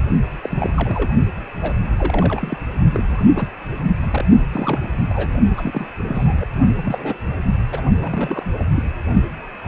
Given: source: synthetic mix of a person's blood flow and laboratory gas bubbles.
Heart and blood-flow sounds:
Doppler ultrasound of blood flow; precordium
0.42-0.73 s: bubbles
0.77-1.11 s: bubbles
1.62-1.73 s: bubbles
1.98-2.57 s: bubbles
2.94-3.02 s: bubbles
3.08-3.29 s: bubbles
3.35-3.47 s: bubbles
4.03-4.06 s: bubbles
4.11-4.25 s: bubbles
4.52-4.99 s: bubbles
5.10-5.33 s: bubbles
5.57-5.86 s: bubbles
6.08-6.33 s: bubbles
6.41-6.46 s: bubbles
6.75-7.18 s: bubbles
7.71-7.81 s: bubbles
8.01-8.43 s: bubbles
8.58-8.63 s: bubbles
8.75-8.83 s: bubbles
From the record:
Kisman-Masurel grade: 232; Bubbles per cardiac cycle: several, 3 to 8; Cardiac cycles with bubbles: 50 to 99%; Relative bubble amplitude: moderate (0.250 to 0.450); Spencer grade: 3 (all of the cardiac periods contain showers or single bubble signals, but not dominating or overriding the cardiac motion signals); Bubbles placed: only in the low amplitude regions of the cardiac cycle

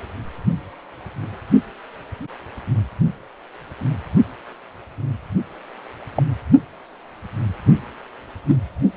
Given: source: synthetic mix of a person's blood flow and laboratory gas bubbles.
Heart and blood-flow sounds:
Doppler ultrasound of blood flow; precordium
6.16-6.22 s: bubbles
8.47-8.57 s: bubbles
From the record:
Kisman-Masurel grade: 122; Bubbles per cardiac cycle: 1 to 2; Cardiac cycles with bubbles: 10 to 50%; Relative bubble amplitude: moderate (0.250 to 0.450); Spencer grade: 2 (many but less than half of the cardiac periods contain bubble signals, singularly or in groups); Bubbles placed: only in the low amplitude regions of the cardiac cycle

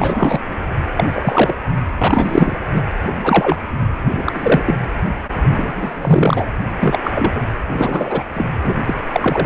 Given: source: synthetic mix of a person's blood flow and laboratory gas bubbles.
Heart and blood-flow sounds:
Doppler ultrasound of blood flow; precordium
0.00-0.40 s: bubbles
0.96-1.54 s: bubbles
1.98-2.55 s: bubbles
2.73-2.82 s: bubbles
3.23-3.57 s: bubbles
4.14-4.62 s: bubbles
4.66-4.74 s: bubbles
5.33-6.47 s: bubbles
6.79-6.99 s: bubbles
7.04-7.49 s: bubbles
7.68-8.23 s: bubbles
8.34-8.47 s: bubbles
8.64-8.75 s: bubbles
8.87-8.94 s: bubbles
9.12-9.46 s: bubbles
From the record:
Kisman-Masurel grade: 243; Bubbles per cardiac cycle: several, 3 to 8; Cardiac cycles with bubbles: 100%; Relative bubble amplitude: loud (0.450 to 0.775); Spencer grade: 3 (all of the cardiac periods contain showers or single bubble signals, but not dominating or overriding the cardiac motion signals); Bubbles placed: anywhere in the cardiac cycle

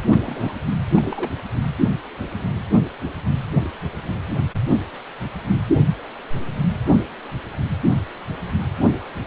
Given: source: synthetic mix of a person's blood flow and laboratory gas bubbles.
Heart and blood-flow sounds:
Doppler ultrasound of blood flow; precordium
0.11-0.56 s: bubbles
0.91-1.30 s: bubbles
From the record:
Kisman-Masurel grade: 221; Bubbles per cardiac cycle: several, 3 to 8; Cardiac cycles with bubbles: 10 to 50%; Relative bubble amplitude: barely perceptible (0.100 to 0.250); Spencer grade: 2 (many but less than half of the cardiac periods contain bubble signals, singularly or in groups); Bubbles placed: anywhere in the cardiac cycle

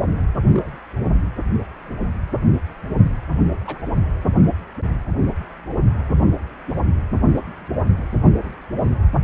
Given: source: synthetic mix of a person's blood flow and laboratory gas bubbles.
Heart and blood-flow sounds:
Doppler ultrasound of blood flow; precordium
0.53-0.77 s: bubbles
3.67-3.80 s: bubbles
8.44-8.55 s: bubbles
8.84-8.92 s: bubbles
From the record:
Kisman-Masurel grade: 121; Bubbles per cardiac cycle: 1 to 2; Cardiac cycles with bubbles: 10 to 50%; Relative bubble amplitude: barely perceptible (0.100 to 0.250); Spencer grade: 2 (many but less than half of the cardiac periods contain bubble signals, singularly or in groups); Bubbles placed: anywhere in the cardiac cycle

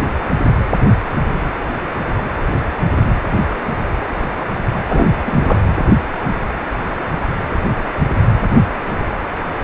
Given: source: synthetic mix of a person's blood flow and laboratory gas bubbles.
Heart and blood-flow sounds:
Doppler ultrasound of blood flow; precordium
4.88-5.13 s: bubbles
5.25-5.58 s: bubbles
From the record:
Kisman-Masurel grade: 212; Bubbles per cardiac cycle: several, 3 to 8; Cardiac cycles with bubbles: 1 to 10%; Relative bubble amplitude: moderate (0.250 to 0.450); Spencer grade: 1 (occasional bubble signal discernible with the cardiac motion signal, with majority of cardiac periods free of bubbles); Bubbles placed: anywhere in the cardiac cycle

